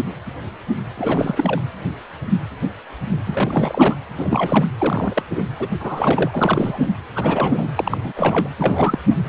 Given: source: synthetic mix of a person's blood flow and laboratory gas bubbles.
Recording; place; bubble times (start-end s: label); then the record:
Doppler ultrasound of blood flow; precordium
0.97-1.61 s: bubbles
3.27-3.95 s: bubbles
4.17-4.65 s: bubbles
4.79-5.23 s: bubbles
5.29-5.46 s: bubbles
5.59-5.69 s: bubbles
5.79-6.92 s: bubbles
7.15-7.72 s: bubbles
7.76-7.97 s: bubbles
8.04-8.13 s: bubbles
8.16-8.48 s: bubbles
8.58-9.02 s: bubbles
9.09-9.15 s: bubbles
From the record:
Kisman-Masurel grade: 332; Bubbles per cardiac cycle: rolling drumbeat, 9 or more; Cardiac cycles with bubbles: 50 to 99%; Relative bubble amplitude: moderate (0.250 to 0.450); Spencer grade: 3 (all of the cardiac periods contain showers or single bubble signals, but not dominating or overriding the cardiac motion signals); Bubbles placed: anywhere in the cardiac cycle